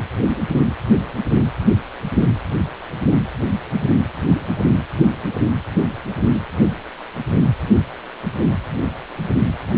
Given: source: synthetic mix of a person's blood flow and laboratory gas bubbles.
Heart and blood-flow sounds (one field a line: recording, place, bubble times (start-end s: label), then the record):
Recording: Doppler ultrasound of blood flow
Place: precordium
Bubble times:
no bubbles
From the record:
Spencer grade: 0 (complete lack of bubble signals)